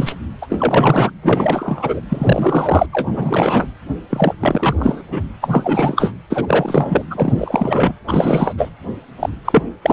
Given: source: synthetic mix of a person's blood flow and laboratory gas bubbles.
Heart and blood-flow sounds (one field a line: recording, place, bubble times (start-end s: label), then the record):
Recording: Doppler ultrasound of blood flow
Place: precordium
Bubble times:
0.00-0.15 s: bubbles
0.41-0.47 s: bubbles
0.49-1.11 s: bubbles
1.22-2.01 s: bubbles
2.09-2.87 s: bubbles
2.93-3.67 s: bubbles
4.10-4.33 s: bubbles
4.40-5.02 s: bubbles
5.11-5.21 s: bubbles
5.41-6.12 s: bubbles
6.29-7.03 s: bubbles
7.10-7.93 s: bubbles
8.07-8.54 s: bubbles
8.57-8.70 s: bubbles
9.19-9.29 s: bubbles
9.45-9.63 s: bubbles
9.82-9.92 s: bubbles
From the record:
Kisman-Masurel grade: 333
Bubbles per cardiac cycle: rolling drumbeat, 9 or more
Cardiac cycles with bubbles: 50 to 99%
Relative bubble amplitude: loud (0.450 to 0.775)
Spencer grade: 3 (all of the cardiac periods contain showers or single bubble signals, but not dominating or overriding the cardiac motion signals)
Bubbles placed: anywhere in the cardiac cycle